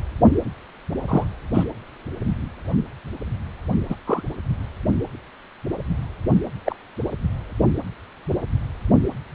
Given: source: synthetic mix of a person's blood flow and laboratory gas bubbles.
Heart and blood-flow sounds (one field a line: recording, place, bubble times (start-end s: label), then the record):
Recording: Doppler ultrasound of blood flow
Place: precordium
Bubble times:
1.08-1.25 s: bubbles
1.54-1.64 s: bubbles
3.89-3.95 s: bubbles
4.06-4.22 s: bubbles
6.65-6.76 s: bubbles
From the record:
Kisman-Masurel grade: 122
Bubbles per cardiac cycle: 1 to 2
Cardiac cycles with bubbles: 10 to 50%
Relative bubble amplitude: moderate (0.250 to 0.450)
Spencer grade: 2 (many but less than half of the cardiac periods contain bubble signals, singularly or in groups)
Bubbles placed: anywhere in the cardiac cycle